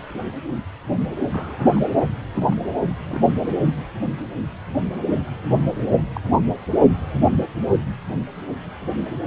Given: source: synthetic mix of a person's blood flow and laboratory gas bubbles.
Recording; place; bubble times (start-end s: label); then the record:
Doppler ultrasound of blood flow; precordium
0.14-0.22 s: bubbles
1.32-1.84 s: bubbles
2.34-2.57 s: bubbles
2.80-3.21 s: bubbles
6.15-6.21 s: bubbles
From the record:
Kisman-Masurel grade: 121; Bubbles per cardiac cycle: 1 to 2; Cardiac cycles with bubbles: 10 to 50%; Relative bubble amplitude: barely perceptible (0.100 to 0.250); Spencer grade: 2 (many but less than half of the cardiac periods contain bubble signals, singularly or in groups); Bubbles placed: anywhere in the cardiac cycle